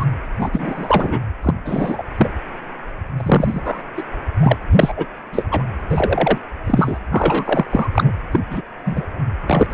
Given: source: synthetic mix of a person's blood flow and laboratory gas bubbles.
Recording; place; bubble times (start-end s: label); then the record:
Doppler ultrasound of blood flow; precordium
0.00-0.05 s: bubbles
0.39-1.21 s: bubbles
1.43-1.54 s: bubbles
1.65-2.03 s: bubbles
2.17-2.29 s: bubbles
3.17-3.81 s: bubbles
3.97-4.03 s: bubbles
4.41-4.57 s: bubbles
4.75-4.93 s: bubbles
4.96-5.05 s: bubbles
5.32-5.45 s: bubbles
5.51-5.64 s: bubbles
5.90-6.38 s: bubbles
6.67-6.98 s: bubbles
7.10-7.65 s: bubbles
7.71-7.88 s: bubbles
7.93-8.12 s: bubbles
8.31-8.39 s: bubbles
8.50-8.61 s: bubbles
8.86-9.07 s: bubbles
9.47-9.66 s: bubbles
9.70-9.74 s: bubbles
From the record:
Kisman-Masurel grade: 243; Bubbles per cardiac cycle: several, 3 to 8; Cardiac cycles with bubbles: 100%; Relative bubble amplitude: loud (0.450 to 0.775); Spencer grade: 3 (all of the cardiac periods contain showers or single bubble signals, but not dominating or overriding the cardiac motion signals); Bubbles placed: anywhere in the cardiac cycle